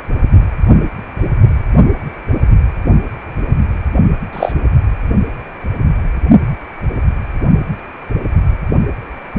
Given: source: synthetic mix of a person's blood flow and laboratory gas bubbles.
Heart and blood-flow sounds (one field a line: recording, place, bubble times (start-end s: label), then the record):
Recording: Doppler ultrasound of blood flow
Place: precordium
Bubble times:
4.33-4.53 s: bubbles
From the record:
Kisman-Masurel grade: 113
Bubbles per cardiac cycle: 1 to 2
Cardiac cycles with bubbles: 1 to 10%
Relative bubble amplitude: loud (0.450 to 0.775)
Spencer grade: 1 (occasional bubble signal discernible with the cardiac motion signal, with majority of cardiac periods free of bubbles)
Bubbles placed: only in the low amplitude regions of the cardiac cycle